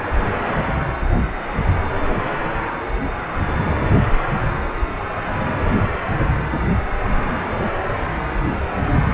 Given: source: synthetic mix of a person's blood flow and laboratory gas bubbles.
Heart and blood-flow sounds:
Doppler ultrasound of blood flow; precordium
no bubbles
From the record:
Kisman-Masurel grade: 000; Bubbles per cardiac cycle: 0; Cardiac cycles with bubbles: 0%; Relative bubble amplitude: no bubbles discernible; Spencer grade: 0 (complete lack of bubble signals)

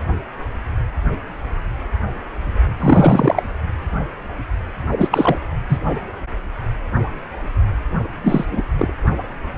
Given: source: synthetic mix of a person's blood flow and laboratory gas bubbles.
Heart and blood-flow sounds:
Doppler ultrasound of blood flow; precordium
2.79-3.42 s: bubbles
4.97-5.35 s: bubbles
5.68-5.79 s: bubbles
8.23-8.45 s: bubbles
8.51-8.63 s: bubbles
8.79-8.93 s: bubbles
From the record:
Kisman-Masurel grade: 223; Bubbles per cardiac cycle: several, 3 to 8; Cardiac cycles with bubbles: 10 to 50%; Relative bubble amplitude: loud (0.450 to 0.775); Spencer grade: 2 (many but less than half of the cardiac periods contain bubble signals, singularly or in groups); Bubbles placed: only in the low amplitude regions of the cardiac cycle

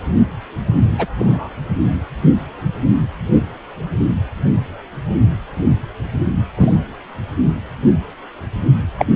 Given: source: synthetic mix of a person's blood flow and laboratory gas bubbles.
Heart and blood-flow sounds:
Doppler ultrasound of blood flow; precordium
0.98-1.07 s: bubbles
1.19-1.49 s: bubbles
6.57-6.77 s: bubbles
8.98-9.05 s: bubbles
From the record:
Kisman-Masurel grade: 123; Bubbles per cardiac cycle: 1 to 2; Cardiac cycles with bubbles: 10 to 50%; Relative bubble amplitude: loud (0.450 to 0.775); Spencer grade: 2 (many but less than half of the cardiac periods contain bubble signals, singularly or in groups); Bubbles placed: anywhere in the cardiac cycle

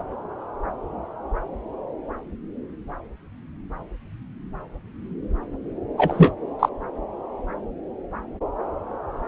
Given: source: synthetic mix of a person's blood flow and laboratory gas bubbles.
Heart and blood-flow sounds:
Doppler ultrasound of blood flow; subclavian vein
5.97-6.34 s: bubbles
6.59-6.69 s: bubbles
From the record:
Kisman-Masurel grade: 213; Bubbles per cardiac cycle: several, 3 to 8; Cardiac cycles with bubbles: 1 to 10%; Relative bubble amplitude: loud (0.450 to 0.775); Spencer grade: 1 (occasional bubble signal discernible with the cardiac motion signal, with majority of cardiac periods free of bubbles); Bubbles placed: anywhere in the cardiac cycle

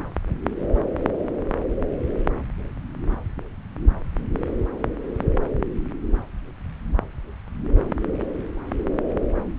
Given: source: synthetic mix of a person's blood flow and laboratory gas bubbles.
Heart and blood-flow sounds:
Doppler ultrasound of blood flow; subclavian vein
no bubbles
From the record:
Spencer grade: 0 (complete lack of bubble signals)

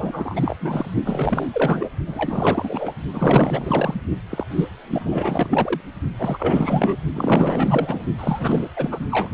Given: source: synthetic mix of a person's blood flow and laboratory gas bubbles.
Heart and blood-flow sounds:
Doppler ultrasound of blood flow; precordium
0.00-0.56 s: bubbles
0.60-0.91 s: bubbles
1.04-1.47 s: bubbles
1.53-1.90 s: bubbles
2.06-2.94 s: bubbles
3.14-4.01 s: bubbles
4.29-4.45 s: bubbles
4.49-4.68 s: bubbles
4.90-5.80 s: bubbles
6.18-6.96 s: bubbles
7.13-8.02 s: bubbles
8.13-8.70 s: bubbles
8.76-9.07 s: bubbles
9.11-9.29 s: bubbles
From the record:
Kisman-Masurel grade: 444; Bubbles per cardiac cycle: continuous sound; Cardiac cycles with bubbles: 100%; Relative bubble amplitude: maximal (0.775 to 0.999); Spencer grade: 4 (maximum detectable bubble signal sounding continuously throughout systole and diastole of every cardiac period, and overriding the amplitude of the normal cardiac signals); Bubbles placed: only in the low amplitude regions of the cardiac cycle

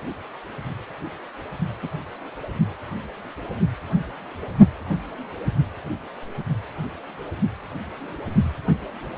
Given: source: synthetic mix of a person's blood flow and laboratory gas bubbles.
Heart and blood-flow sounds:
Doppler ultrasound of blood flow; precordium
1.82-1.88 s: bubbles
From the record:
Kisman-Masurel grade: 111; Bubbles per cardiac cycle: 1 to 2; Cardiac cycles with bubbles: 1 to 10%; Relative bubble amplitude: barely perceptible (0.100 to 0.250); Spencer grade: 1 (occasional bubble signal discernible with the cardiac motion signal, with majority of cardiac periods free of bubbles); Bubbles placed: only in the low amplitude regions of the cardiac cycle

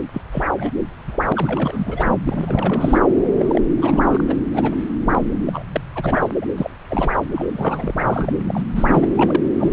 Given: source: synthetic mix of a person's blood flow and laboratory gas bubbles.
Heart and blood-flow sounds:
Doppler ultrasound of blood flow; subclavian vein
0.13-0.21 s: bubbles
0.31-0.44 s: bubbles
0.56-0.70 s: bubbles
1.08-1.18 s: bubbles
1.22-2.15 s: bubbles
2.27-2.98 s: bubbles
3.35-3.62 s: bubbles
3.77-4.35 s: bubbles
4.39-4.82 s: bubbles
5.05-5.21 s: bubbles
5.46-5.62 s: bubbles
5.74-5.81 s: bubbles
5.96-6.30 s: bubbles
6.42-6.46 s: bubbles
6.56-6.71 s: bubbles
6.89-7.11 s: bubbles
7.35-7.46 s: bubbles
7.52-8.38 s: bubbles
8.44-8.63 s: bubbles
8.75-9.06 s: bubbles
9.16-9.42 s: bubbles
9.58-9.73 s: bubbles
From the record:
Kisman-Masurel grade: 342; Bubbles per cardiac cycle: rolling drumbeat, 9 or more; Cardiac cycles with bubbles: 100%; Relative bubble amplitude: moderate (0.250 to 0.450); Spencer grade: 3 (all of the cardiac periods contain showers or single bubble signals, but not dominating or overriding the cardiac motion signals); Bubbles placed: anywhere in the cardiac cycle

